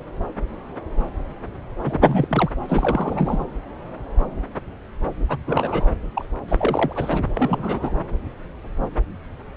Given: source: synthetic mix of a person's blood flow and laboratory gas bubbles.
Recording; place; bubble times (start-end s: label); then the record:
Doppler ultrasound of blood flow; subclavian vein
1.84-2.50 s: bubbles
2.68-3.46 s: bubbles
5.29-5.38 s: bubbles
5.46-5.88 s: bubbles
6.16-6.25 s: bubbles
6.48-7.20 s: bubbles
7.37-7.92 s: bubbles
From the record:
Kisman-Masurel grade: 332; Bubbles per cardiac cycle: rolling drumbeat, 9 or more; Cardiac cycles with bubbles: 50 to 99%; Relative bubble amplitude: moderate (0.250 to 0.450); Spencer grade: 3 (all of the cardiac periods contain showers or single bubble signals, but not dominating or overriding the cardiac motion signals); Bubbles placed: anywhere in the cardiac cycle